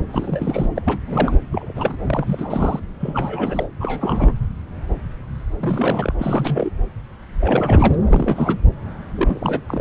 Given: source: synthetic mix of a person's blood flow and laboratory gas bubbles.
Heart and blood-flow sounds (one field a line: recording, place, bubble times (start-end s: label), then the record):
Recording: Doppler ultrasound of blood flow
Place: subclavian vein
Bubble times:
0.12-0.69 s: bubbles
0.76-1.00 s: bubbles
1.06-1.36 s: bubbles
1.52-1.98 s: bubbles
2.06-2.80 s: bubbles
3.00-3.68 s: bubbles
3.80-4.33 s: bubbles
5.59-6.14 s: bubbles
6.18-6.69 s: bubbles
7.40-7.96 s: bubbles
8.07-8.59 s: bubbles
9.15-9.61 s: bubbles
9.68-9.81 s: bubbles
From the record:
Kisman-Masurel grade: 332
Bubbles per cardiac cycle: rolling drumbeat, 9 or more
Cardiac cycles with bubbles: 50 to 99%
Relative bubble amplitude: moderate (0.250 to 0.450)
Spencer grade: 3 (all of the cardiac periods contain showers or single bubble signals, but not dominating or overriding the cardiac motion signals)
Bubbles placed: anywhere in the cardiac cycle